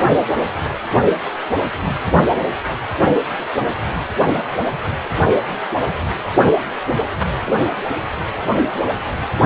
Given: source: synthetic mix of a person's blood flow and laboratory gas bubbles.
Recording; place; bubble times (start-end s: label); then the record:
Doppler ultrasound of blood flow; precordium
7.45-7.57 s: bubbles
From the record:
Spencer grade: 2 (many but less than half of the cardiac periods contain bubble signals, singularly or in groups); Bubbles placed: anywhere in the cardiac cycle